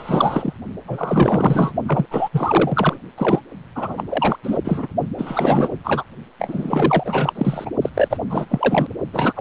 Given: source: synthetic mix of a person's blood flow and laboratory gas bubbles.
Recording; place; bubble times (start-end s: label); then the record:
Doppler ultrasound of blood flow; precordium
0.00-0.53 s: bubbles
0.87-1.73 s: bubbles
1.86-2.06 s: bubbles
2.10-2.29 s: bubbles
2.31-2.98 s: bubbles
3.17-3.40 s: bubbles
3.75-4.04 s: bubbles
4.08-4.37 s: bubbles
4.43-4.58 s: bubbles
4.64-4.88 s: bubbles
5.18-5.69 s: bubbles
5.84-6.04 s: bubbles
6.39-7.71 s: bubbles
7.82-7.90 s: bubbles
7.94-8.17 s: bubbles
8.30-8.46 s: bubbles
8.49-8.87 s: bubbles
9.12-9.41 s: bubbles
From the record:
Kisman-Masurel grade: 444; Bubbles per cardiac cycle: continuous sound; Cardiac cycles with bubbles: 100%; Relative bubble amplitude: maximal (0.775 to 0.999); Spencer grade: 4 (maximum detectable bubble signal sounding continuously throughout systole and diastole of every cardiac period, and overriding the amplitude of the normal cardiac signals); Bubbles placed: only in the low amplitude regions of the cardiac cycle